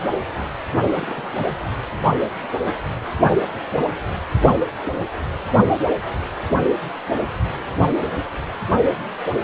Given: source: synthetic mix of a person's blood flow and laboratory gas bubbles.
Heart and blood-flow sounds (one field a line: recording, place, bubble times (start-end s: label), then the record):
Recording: Doppler ultrasound of blood flow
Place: precordium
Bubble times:
0.93-1.30 s: bubbles
From the record:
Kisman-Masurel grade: 111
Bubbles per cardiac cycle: 1 to 2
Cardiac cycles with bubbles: 1 to 10%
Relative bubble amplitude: barely perceptible (0.100 to 0.250)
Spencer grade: 1 (occasional bubble signal discernible with the cardiac motion signal, with majority of cardiac periods free of bubbles)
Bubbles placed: anywhere in the cardiac cycle